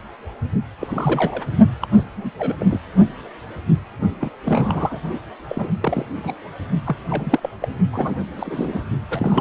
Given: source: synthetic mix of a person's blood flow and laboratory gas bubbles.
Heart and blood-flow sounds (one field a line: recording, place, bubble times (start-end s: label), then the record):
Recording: Doppler ultrasound of blood flow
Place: precordium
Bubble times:
0.80-1.45 s: bubbles
1.81-1.88 s: bubbles
1.94-2.04 s: bubbles
2.16-2.30 s: bubbles
2.39-2.55 s: bubbles
2.60-2.66 s: bubbles
2.71-2.79 s: bubbles
4.21-4.29 s: bubbles
4.45-4.99 s: bubbles
5.49-5.71 s: bubbles
5.80-6.05 s: bubbles
6.17-6.34 s: bubbles
6.86-7.40 s: bubbles
7.42-7.50 s: bubbles
7.60-7.68 s: bubbles
7.92-8.82 s: bubbles
9.09-9.41 s: bubbles
From the record:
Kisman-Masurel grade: 332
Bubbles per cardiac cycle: rolling drumbeat, 9 or more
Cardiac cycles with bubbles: 50 to 99%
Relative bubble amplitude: moderate (0.250 to 0.450)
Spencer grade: 3 (all of the cardiac periods contain showers or single bubble signals, but not dominating or overriding the cardiac motion signals)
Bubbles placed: only in the low amplitude regions of the cardiac cycle